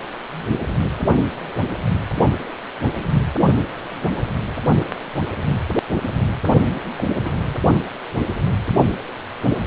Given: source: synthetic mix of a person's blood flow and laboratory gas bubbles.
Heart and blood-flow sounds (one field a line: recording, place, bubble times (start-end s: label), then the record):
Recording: Doppler ultrasound of blood flow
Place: precordium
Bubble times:
6.97-7.04 s: bubbles
7.25-7.30 s: bubbles
From the record:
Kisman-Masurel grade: 121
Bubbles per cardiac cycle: 1 to 2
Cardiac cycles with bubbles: 10 to 50%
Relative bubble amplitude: barely perceptible (0.100 to 0.250)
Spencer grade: 2 (many but less than half of the cardiac periods contain bubble signals, singularly or in groups)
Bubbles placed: only in the low amplitude regions of the cardiac cycle